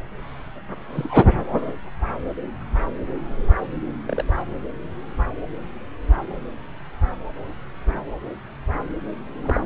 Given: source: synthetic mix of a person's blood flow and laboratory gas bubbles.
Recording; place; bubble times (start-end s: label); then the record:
Doppler ultrasound of blood flow; subclavian vein
0.93-1.34 s: bubbles
4.06-4.24 s: bubbles
9.43-9.61 s: bubbles
From the record:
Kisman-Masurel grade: 121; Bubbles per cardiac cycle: 1 to 2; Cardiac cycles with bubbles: 10 to 50%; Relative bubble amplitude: barely perceptible (0.100 to 0.250); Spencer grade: 2 (many but less than half of the cardiac periods contain bubble signals, singularly or in groups); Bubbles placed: anywhere in the cardiac cycle